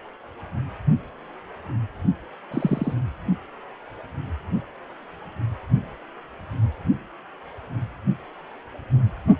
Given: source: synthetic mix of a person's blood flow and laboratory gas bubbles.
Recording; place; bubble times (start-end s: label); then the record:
Doppler ultrasound of blood flow; precordium
2.51-2.94 s: bubbles
From the record:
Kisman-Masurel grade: 112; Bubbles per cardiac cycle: 1 to 2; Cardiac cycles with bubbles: 1 to 10%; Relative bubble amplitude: moderate (0.250 to 0.450); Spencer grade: 1 (occasional bubble signal discernible with the cardiac motion signal, with majority of cardiac periods free of bubbles); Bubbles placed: anywhere in the cardiac cycle